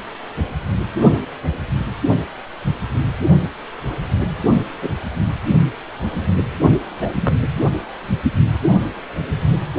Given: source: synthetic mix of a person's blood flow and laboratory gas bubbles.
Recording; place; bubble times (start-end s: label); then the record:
Doppler ultrasound of blood flow; precordium
4.82-4.90 s: bubbles
7.00-7.12 s: bubbles
7.21-7.35 s: bubbles
From the record:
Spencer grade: 2 (many but less than half of the cardiac periods contain bubble signals, singularly or in groups); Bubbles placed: anywhere in the cardiac cycle